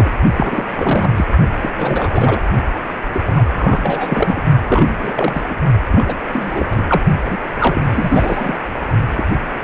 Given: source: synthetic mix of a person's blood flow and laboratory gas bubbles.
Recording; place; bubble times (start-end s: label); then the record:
Doppler ultrasound of blood flow; precordium
0.00-0.12 s: bubbles
0.36-0.67 s: bubbles
0.71-1.25 s: bubbles
1.59-1.72 s: bubbles
1.76-2.40 s: bubbles
3.13-3.21 s: bubbles
3.26-3.42 s: bubbles
3.52-4.44 s: bubbles
4.67-5.43 s: bubbles
5.49-5.55 s: bubbles
5.89-6.15 s: bubbles
6.32-6.82 s: bubbles
6.89-7.01 s: bubbles
7.25-7.38 s: bubbles
7.60-8.60 s: bubbles
9.15-9.23 s: bubbles
9.61-9.64 s: bubbles
From the record:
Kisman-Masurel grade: 332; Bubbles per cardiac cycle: rolling drumbeat, 9 or more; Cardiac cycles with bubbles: 50 to 99%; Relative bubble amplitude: moderate (0.250 to 0.450); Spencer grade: 3 (all of the cardiac periods contain showers or single bubble signals, but not dominating or overriding the cardiac motion signals); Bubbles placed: only in the low amplitude regions of the cardiac cycle